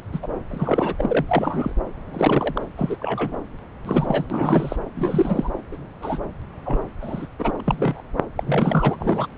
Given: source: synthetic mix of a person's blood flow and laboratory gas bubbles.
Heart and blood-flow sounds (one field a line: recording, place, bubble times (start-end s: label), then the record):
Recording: Doppler ultrasound of blood flow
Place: subclavian vein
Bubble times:
0.00-0.02 s: bubbles
0.12-0.19 s: bubbles
0.22-0.27 s: bubbles
0.50-0.95 s: bubbles
0.98-1.25 s: bubbles
1.28-1.73 s: bubbles
2.13-2.62 s: bubbles
2.77-2.96 s: bubbles
2.99-3.38 s: bubbles
3.85-4.26 s: bubbles
4.30-4.76 s: bubbles
4.95-5.50 s: bubbles
5.71-5.77 s: bubbles
6.01-6.18 s: bubbles
6.65-6.80 s: bubbles
7.01-7.26 s: bubbles
7.38-7.52 s: bubbles
7.65-8.02 s: bubbles
8.38-8.96 s: bubbles
8.99-9.26 s: bubbles
From the record:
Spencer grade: 3 (all of the cardiac periods contain showers or single bubble signals, but not dominating or overriding the cardiac motion signals)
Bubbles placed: anywhere in the cardiac cycle